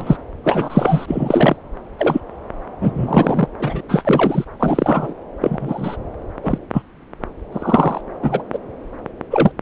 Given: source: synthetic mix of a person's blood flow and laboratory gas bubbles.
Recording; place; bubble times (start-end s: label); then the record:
Doppler ultrasound of blood flow; subclavian vein
0.00-0.17 s: bubbles
0.44-1.56 s: bubbles
1.99-2.21 s: bubbles
2.81-3.47 s: bubbles
3.59-3.80 s: bubbles
3.88-4.45 s: bubbles
4.59-5.14 s: bubbles
5.41-5.96 s: bubbles
6.42-6.58 s: bubbles
6.74-6.82 s: bubbles
7.52-8.01 s: bubbles
8.22-8.42 s: bubbles
8.53-8.59 s: bubbles
9.30-9.54 s: bubbles
From the record:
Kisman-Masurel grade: 243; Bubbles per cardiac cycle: several, 3 to 8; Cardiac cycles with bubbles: 100%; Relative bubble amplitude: loud (0.450 to 0.775); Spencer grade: 3 (all of the cardiac periods contain showers or single bubble signals, but not dominating or overriding the cardiac motion signals); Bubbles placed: anywhere in the cardiac cycle